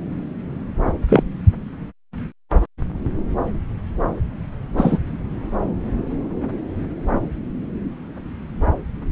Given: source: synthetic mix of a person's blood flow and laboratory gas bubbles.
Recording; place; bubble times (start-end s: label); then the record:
Doppler ultrasound of blood flow; subclavian vein
1.08-1.23 s: bubbles
4.77-4.98 s: bubbles
From the record:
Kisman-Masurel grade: 123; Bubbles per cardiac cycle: 1 to 2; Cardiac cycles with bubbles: 10 to 50%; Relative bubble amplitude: loud (0.450 to 0.775); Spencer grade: 2 (many but less than half of the cardiac periods contain bubble signals, singularly or in groups); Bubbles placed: anywhere in the cardiac cycle